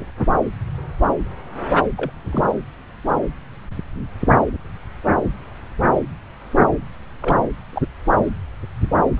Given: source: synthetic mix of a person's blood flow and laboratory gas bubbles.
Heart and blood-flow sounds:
Doppler ultrasound of blood flow; subclavian vein
1.96-2.12 s: bubbles
2.21-2.48 s: bubbles
7.22-7.37 s: bubbles
7.72-7.81 s: bubbles
From the record:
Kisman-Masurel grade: 211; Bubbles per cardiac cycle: several, 3 to 8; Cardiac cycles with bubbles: 1 to 10%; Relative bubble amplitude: barely perceptible (0.100 to 0.250); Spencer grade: 1 (occasional bubble signal discernible with the cardiac motion signal, with majority of cardiac periods free of bubbles); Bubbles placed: anywhere in the cardiac cycle

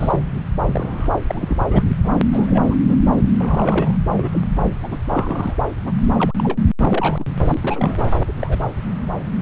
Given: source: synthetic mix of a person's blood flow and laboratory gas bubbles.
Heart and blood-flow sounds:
Doppler ultrasound of blood flow; subclavian vein
0.00-0.20 s: bubbles
0.72-1.20 s: bubbles
1.29-1.57 s: bubbles
1.71-1.84 s: bubbles
2.04-2.11 s: bubbles
2.32-2.77 s: bubbles
2.87-2.96 s: bubbles
3.17-3.23 s: bubbles
3.37-3.96 s: bubbles
4.16-4.28 s: bubbles
4.31-4.41 s: bubbles
4.83-4.98 s: bubbles
5.08-5.55 s: bubbles
5.59-5.65 s: bubbles
5.85-5.92 s: bubbles
6.18-6.32 s: bubbles
6.38-6.58 s: bubbles
6.79-7.24 s: bubbles
7.47-8.12 s: bubbles
8.28-8.32 s: bubbles
8.41-8.59 s: bubbles
From the record:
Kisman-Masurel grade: 232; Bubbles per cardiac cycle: several, 3 to 8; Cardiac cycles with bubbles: 50 to 99%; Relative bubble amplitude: moderate (0.250 to 0.450); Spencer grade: 3 (all of the cardiac periods contain showers or single bubble signals, but not dominating or overriding the cardiac motion signals); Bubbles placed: anywhere in the cardiac cycle

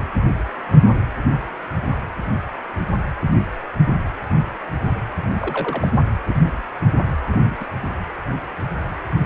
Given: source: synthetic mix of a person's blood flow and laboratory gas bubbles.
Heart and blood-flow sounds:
Doppler ultrasound of blood flow; precordium
5.42-5.88 s: bubbles
6.28-6.62 s: bubbles
7.29-7.56 s: bubbles
7.60-7.66 s: bubbles
From the record:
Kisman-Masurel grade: 121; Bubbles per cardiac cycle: 1 to 2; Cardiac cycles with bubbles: 10 to 50%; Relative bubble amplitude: barely perceptible (0.100 to 0.250); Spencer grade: 2 (many but less than half of the cardiac periods contain bubble signals, singularly or in groups); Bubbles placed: anywhere in the cardiac cycle

